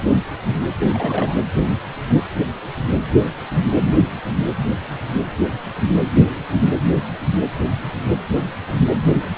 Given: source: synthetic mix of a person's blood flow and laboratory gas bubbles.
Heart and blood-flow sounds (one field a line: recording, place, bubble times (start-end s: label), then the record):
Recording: Doppler ultrasound of blood flow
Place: precordium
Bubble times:
0.80-1.34 s: bubbles
From the record:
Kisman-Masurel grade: 211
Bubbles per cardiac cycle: several, 3 to 8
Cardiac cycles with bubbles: 1 to 10%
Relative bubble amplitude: barely perceptible (0.100 to 0.250)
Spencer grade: 1 (occasional bubble signal discernible with the cardiac motion signal, with majority of cardiac periods free of bubbles)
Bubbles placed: anywhere in the cardiac cycle